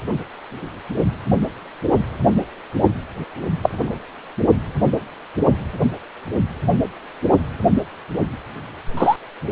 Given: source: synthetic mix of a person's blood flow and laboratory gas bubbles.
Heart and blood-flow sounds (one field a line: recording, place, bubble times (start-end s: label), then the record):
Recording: Doppler ultrasound of blood flow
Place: precordium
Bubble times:
3.62-3.93 s: bubbles
8.97-9.16 s: bubbles
From the record:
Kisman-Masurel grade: 123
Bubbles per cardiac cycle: 1 to 2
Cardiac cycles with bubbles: 10 to 50%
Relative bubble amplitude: loud (0.450 to 0.775)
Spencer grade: 2 (many but less than half of the cardiac periods contain bubble signals, singularly or in groups)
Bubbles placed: anywhere in the cardiac cycle